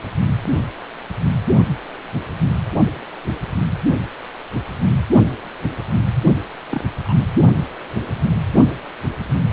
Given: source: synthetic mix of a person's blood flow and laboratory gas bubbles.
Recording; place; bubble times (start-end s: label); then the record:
Doppler ultrasound of blood flow; precordium
6.70-6.81 s: bubbles
7.04-7.15 s: bubbles
From the record:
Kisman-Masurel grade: 111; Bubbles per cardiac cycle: 1 to 2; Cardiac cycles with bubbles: 1 to 10%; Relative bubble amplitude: barely perceptible (0.100 to 0.250); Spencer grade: 1 (occasional bubble signal discernible with the cardiac motion signal, with majority of cardiac periods free of bubbles); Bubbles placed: only in the low amplitude regions of the cardiac cycle